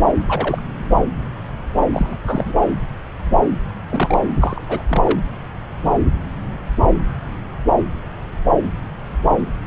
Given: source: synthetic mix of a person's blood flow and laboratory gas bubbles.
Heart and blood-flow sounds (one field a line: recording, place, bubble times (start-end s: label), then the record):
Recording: Doppler ultrasound of blood flow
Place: subclavian vein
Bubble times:
0.26-0.62 s: bubbles
1.92-2.18 s: bubbles
2.26-2.53 s: bubbles
3.90-4.18 s: bubbles
4.40-4.82 s: bubbles
4.88-5.19 s: bubbles
From the record:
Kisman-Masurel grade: 222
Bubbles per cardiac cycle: several, 3 to 8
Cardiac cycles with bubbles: 10 to 50%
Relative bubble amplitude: moderate (0.250 to 0.450)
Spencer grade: 2 (many but less than half of the cardiac periods contain bubble signals, singularly or in groups)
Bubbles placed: anywhere in the cardiac cycle